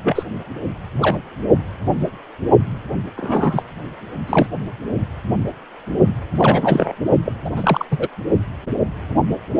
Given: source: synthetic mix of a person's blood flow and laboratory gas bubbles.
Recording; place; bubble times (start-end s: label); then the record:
Doppler ultrasound of blood flow; precordium
0.03-0.23 s: bubbles
1.01-1.17 s: bubbles
3.17-3.63 s: bubbles
4.27-4.47 s: bubbles
6.39-6.93 s: bubbles
7.25-7.33 s: bubbles
7.45-7.50 s: bubbles
7.56-7.86 s: bubbles
7.91-8.08 s: bubbles
From the record:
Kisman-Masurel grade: 223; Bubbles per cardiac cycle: several, 3 to 8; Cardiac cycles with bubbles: 10 to 50%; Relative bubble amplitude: loud (0.450 to 0.775); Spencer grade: 2 (many but less than half of the cardiac periods contain bubble signals, singularly or in groups); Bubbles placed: only in the low amplitude regions of the cardiac cycle